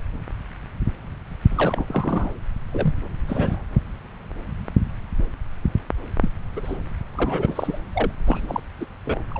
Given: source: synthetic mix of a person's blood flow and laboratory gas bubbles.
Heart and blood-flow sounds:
Doppler ultrasound of blood flow; subclavian vein
1.50-2.31 s: bubbles
2.72-2.94 s: bubbles
3.27-3.63 s: bubbles
6.21-6.29 s: bubbles
6.56-6.60 s: bubbles
6.63-6.78 s: bubbles
7.15-7.79 s: bubbles
7.93-8.11 s: bubbles
8.27-8.61 s: bubbles
8.81-8.85 s: bubbles
9.06-9.23 s: bubbles
9.31-9.40 s: bubbles
From the record:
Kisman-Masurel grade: 232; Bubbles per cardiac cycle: several, 3 to 8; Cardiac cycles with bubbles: 50 to 99%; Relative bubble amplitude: moderate (0.250 to 0.450); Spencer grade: 3 (all of the cardiac periods contain showers or single bubble signals, but not dominating or overriding the cardiac motion signals); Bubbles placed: anywhere in the cardiac cycle

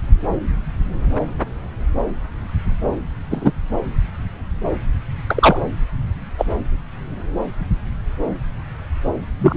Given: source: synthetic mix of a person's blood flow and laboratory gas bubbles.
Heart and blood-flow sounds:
Doppler ultrasound of blood flow; subclavian vein
3.30-3.52 s: bubbles
5.26-5.67 s: bubbles
6.38-6.45 s: bubbles
9.39-9.57 s: bubbles
From the record:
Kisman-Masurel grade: 123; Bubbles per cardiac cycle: 1 to 2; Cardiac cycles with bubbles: 10 to 50%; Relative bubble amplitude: loud (0.450 to 0.775); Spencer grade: 2 (many but less than half of the cardiac periods contain bubble signals, singularly or in groups); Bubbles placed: anywhere in the cardiac cycle

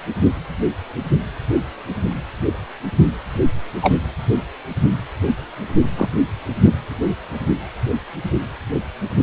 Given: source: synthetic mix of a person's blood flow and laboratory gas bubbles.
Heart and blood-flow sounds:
Doppler ultrasound of blood flow; precordium
3.82-3.94 s: bubbles
5.97-6.09 s: bubbles
6.65-6.73 s: bubbles
From the record:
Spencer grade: 2 (many but less than half of the cardiac periods contain bubble signals, singularly or in groups); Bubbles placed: anywhere in the cardiac cycle

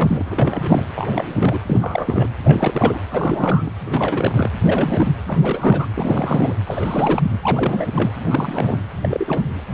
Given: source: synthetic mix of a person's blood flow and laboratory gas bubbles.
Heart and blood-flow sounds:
Doppler ultrasound of blood flow; precordium
0.00-0.83 s: bubbles
0.95-1.59 s: bubbles
1.66-2.27 s: bubbles
2.44-3.01 s: bubbles
3.10-3.71 s: bubbles
3.85-4.51 s: bubbles
4.65-5.12 s: bubbles
5.28-5.86 s: bubbles
5.94-6.54 s: bubbles
6.67-7.31 s: bubbles
7.42-7.91 s: bubbles
7.95-8.11 s: bubbles
8.30-8.88 s: bubbles
9.02-9.43 s: bubbles
From the record:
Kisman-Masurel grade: 332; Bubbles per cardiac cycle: rolling drumbeat, 9 or more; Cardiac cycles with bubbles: 50 to 99%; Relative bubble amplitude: moderate (0.250 to 0.450); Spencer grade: 3 (all of the cardiac periods contain showers or single bubble signals, but not dominating or overriding the cardiac motion signals); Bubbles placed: anywhere in the cardiac cycle

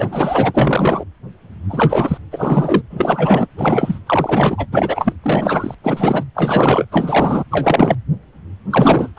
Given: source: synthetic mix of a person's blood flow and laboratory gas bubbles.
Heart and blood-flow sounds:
Doppler ultrasound of blood flow; precordium
0.00-1.04 s: bubbles
1.69-2.18 s: bubbles
2.31-2.82 s: bubbles
2.90-3.47 s: bubbles
3.58-3.99 s: bubbles
4.06-4.67 s: bubbles
4.72-5.13 s: bubbles
5.23-5.74 s: bubbles
5.84-6.24 s: bubbles
6.34-6.85 s: bubbles
6.91-7.43 s: bubbles
7.51-7.96 s: bubbles
8.70-9.09 s: bubbles
9.17-9.19 s: bubbles
From the record:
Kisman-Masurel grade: 333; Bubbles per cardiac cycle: rolling drumbeat, 9 or more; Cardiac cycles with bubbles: 50 to 99%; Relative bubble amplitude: loud (0.450 to 0.775); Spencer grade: 3 (all of the cardiac periods contain showers or single bubble signals, but not dominating or overriding the cardiac motion signals); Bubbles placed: anywhere in the cardiac cycle

